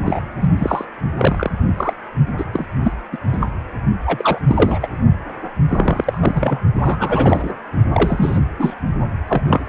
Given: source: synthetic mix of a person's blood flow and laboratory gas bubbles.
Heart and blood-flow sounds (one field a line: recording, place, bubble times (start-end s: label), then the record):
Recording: Doppler ultrasound of blood flow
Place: precordium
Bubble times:
0.05-0.22 s: bubbles
0.41-0.50 s: bubbles
0.57-0.85 s: bubbles
1.18-1.51 s: bubbles
1.77-1.94 s: bubbles
2.38-2.44 s: bubbles
2.53-2.68 s: bubbles
2.83-2.93 s: bubbles
3.12-3.17 s: bubbles
3.31-3.48 s: bubbles
4.06-4.38 s: bubbles
4.47-4.79 s: bubbles
4.82-4.89 s: bubbles
5.67-6.58 s: bubbles
6.74-7.52 s: bubbles
7.92-8.38 s: bubbles
8.59-8.74 s: bubbles
9.28-9.42 s: bubbles
9.47-9.68 s: bubbles
From the record:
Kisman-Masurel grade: 243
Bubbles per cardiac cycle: several, 3 to 8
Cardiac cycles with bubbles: 100%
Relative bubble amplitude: loud (0.450 to 0.775)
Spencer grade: 3 (all of the cardiac periods contain showers or single bubble signals, but not dominating or overriding the cardiac motion signals)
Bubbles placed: only in the low amplitude regions of the cardiac cycle